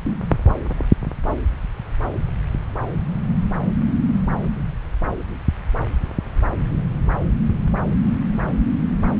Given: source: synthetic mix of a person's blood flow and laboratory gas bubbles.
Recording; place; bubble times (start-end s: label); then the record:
Doppler ultrasound of blood flow; subclavian vein
no bubbles
From the record:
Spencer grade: 0 (complete lack of bubble signals)